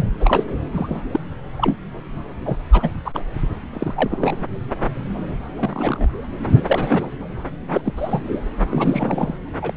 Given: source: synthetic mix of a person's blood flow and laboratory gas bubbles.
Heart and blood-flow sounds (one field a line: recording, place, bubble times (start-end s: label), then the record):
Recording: Doppler ultrasound of blood flow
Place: subclavian vein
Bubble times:
0.00-0.06 s: bubbles
0.20-0.44 s: bubbles
0.74-1.01 s: bubbles
1.12-1.20 s: bubbles
1.57-1.75 s: bubbles
2.45-2.57 s: bubbles
2.72-2.90 s: bubbles
3.05-3.20 s: bubbles
3.73-4.46 s: bubbles
5.56-6.08 s: bubbles
6.37-7.07 s: bubbles
7.70-7.81 s: bubbles
7.85-7.92 s: bubbles
7.97-8.38 s: bubbles
8.50-8.54 s: bubbles
8.69-9.34 s: bubbles
9.61-9.73 s: bubbles
From the record:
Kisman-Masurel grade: 232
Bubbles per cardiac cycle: several, 3 to 8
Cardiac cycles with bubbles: 50 to 99%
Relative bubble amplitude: moderate (0.250 to 0.450)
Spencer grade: 3 (all of the cardiac periods contain showers or single bubble signals, but not dominating or overriding the cardiac motion signals)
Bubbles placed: anywhere in the cardiac cycle